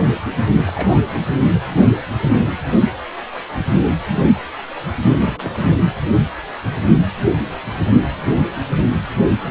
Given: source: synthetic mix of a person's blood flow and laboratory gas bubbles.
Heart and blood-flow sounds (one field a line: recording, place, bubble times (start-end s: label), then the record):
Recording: Doppler ultrasound of blood flow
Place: precordium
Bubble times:
0.56-1.02 s: bubbles
1.05-1.21 s: bubbles
1.54-1.60 s: bubbles
5.06-5.75 s: bubbles
From the record:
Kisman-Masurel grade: 221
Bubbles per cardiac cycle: several, 3 to 8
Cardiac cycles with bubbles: 10 to 50%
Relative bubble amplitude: barely perceptible (0.100 to 0.250)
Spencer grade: 2 (many but less than half of the cardiac periods contain bubble signals, singularly or in groups)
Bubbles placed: anywhere in the cardiac cycle